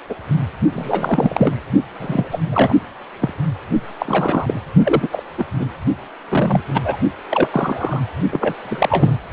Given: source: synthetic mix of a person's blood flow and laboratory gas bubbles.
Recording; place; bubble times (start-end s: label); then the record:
Doppler ultrasound of blood flow; precordium
0.09-0.15 s: bubbles
0.72-1.52 s: bubbles
1.99-2.74 s: bubbles
3.21-3.33 s: bubbles
4.00-4.60 s: bubbles
4.83-5.08 s: bubbles
5.12-5.23 s: bubbles
5.38-5.45 s: bubbles
5.59-5.66 s: bubbles
6.29-6.61 s: bubbles
6.74-6.97 s: bubbles
7.29-8.01 s: bubbles
8.31-8.55 s: bubbles
8.65-9.18 s: bubbles
From the record:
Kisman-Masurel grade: 243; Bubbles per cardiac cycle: several, 3 to 8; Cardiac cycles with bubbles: 100%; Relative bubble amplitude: loud (0.450 to 0.775); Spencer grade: 3 (all of the cardiac periods contain showers or single bubble signals, but not dominating or overriding the cardiac motion signals); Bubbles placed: only in the low amplitude regions of the cardiac cycle